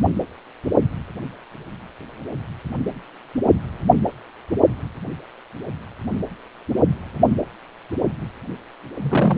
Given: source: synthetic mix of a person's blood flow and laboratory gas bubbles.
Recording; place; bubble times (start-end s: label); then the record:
Doppler ultrasound of blood flow; precordium
9.02-9.38 s: bubbles
From the record:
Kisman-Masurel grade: 222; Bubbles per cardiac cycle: several, 3 to 8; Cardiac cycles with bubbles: 10 to 50%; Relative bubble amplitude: moderate (0.250 to 0.450); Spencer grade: 2 (many but less than half of the cardiac periods contain bubble signals, singularly or in groups); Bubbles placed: anywhere in the cardiac cycle